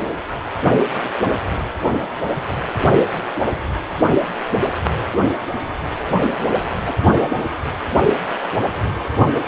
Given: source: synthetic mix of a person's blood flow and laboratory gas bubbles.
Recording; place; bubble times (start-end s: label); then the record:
Doppler ultrasound of blood flow; precordium
6.25-6.72 s: bubbles
6.84-6.97 s: bubbles
From the record:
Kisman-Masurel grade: 111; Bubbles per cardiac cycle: 1 to 2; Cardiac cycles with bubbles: 1 to 10%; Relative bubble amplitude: barely perceptible (0.100 to 0.250); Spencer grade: 1 (occasional bubble signal discernible with the cardiac motion signal, with majority of cardiac periods free of bubbles); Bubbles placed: only in the low amplitude regions of the cardiac cycle